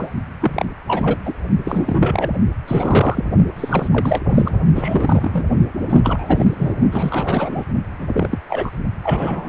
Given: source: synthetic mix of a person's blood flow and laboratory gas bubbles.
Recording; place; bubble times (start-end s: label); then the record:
Doppler ultrasound of blood flow; precordium
0.00-0.11 s: bubbles
0.40-0.66 s: bubbles
0.88-1.18 s: bubbles
1.25-1.33 s: bubbles
1.65-2.30 s: bubbles
2.67-3.25 s: bubbles
3.56-3.88 s: bubbles
3.92-4.21 s: bubbles
4.29-4.51 s: bubbles
4.75-5.42 s: bubbles
5.89-6.00 s: bubbles
6.03-6.72 s: bubbles
6.91-7.66 s: bubbles
7.99-8.09 s: bubbles
8.12-8.38 s: bubbles
8.49-8.71 s: bubbles
9.03-9.48 s: bubbles
From the record:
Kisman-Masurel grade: 343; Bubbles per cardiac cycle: rolling drumbeat, 9 or more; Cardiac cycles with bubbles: 100%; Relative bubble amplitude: loud (0.450 to 0.775); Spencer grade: 3 (all of the cardiac periods contain showers or single bubble signals, but not dominating or overriding the cardiac motion signals); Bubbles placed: only in the low amplitude regions of the cardiac cycle